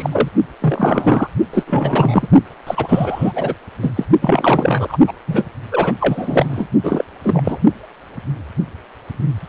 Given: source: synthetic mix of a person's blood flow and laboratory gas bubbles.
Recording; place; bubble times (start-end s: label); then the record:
Doppler ultrasound of blood flow; precordium
0.00-0.28 s: bubbles
0.60-1.27 s: bubbles
1.53-1.63 s: bubbles
1.67-2.28 s: bubbles
2.67-3.33 s: bubbles
3.35-3.54 s: bubbles
3.82-3.93 s: bubbles
3.96-4.04 s: bubbles
4.21-4.97 s: bubbles
5.07-5.12 s: bubbles
5.27-5.45 s: bubbles
5.71-5.95 s: bubbles
6.00-6.67 s: bubbles
6.83-7.04 s: bubbles
7.23-7.58 s: bubbles
From the record:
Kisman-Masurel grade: 333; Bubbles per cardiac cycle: rolling drumbeat, 9 or more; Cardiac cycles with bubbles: 50 to 99%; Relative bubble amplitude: loud (0.450 to 0.775); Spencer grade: 3 (all of the cardiac periods contain showers or single bubble signals, but not dominating or overriding the cardiac motion signals); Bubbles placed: only in the low amplitude regions of the cardiac cycle